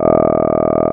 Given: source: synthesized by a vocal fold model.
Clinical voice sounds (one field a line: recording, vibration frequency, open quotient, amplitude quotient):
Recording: sustained vowel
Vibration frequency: 40 Hz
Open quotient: 0.1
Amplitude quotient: 1